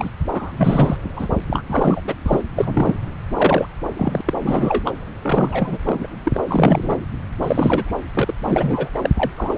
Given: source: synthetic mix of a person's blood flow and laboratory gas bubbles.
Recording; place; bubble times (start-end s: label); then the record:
Doppler ultrasound of blood flow; subclavian vein
0.00-0.10 s: bubbles
0.29-0.53 s: bubbles
0.57-0.96 s: bubbles
1.16-1.27 s: bubbles
1.50-1.64 s: bubbles
1.66-2.01 s: bubbles
2.07-2.14 s: bubbles
2.26-2.42 s: bubbles
2.56-2.96 s: bubbles
3.33-3.66 s: bubbles
3.96-4.21 s: bubbles
4.25-4.33 s: bubbles
4.41-4.92 s: bubbles
5.23-5.78 s: bubbles
5.86-6.07 s: bubbles
6.23-6.40 s: bubbles
6.47-6.96 s: bubbles
7.42-7.93 s: bubbles
8.13-8.34 s: bubbles
8.46-8.90 s: bubbles
8.94-8.99 s: bubbles
9.03-9.10 s: bubbles
9.17-9.31 s: bubbles
9.37-9.58 s: bubbles
From the record:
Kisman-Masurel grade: 342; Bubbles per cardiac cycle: rolling drumbeat, 9 or more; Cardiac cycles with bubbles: 100%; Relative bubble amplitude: moderate (0.250 to 0.450); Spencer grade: 3 (all of the cardiac periods contain showers or single bubble signals, but not dominating or overriding the cardiac motion signals); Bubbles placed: anywhere in the cardiac cycle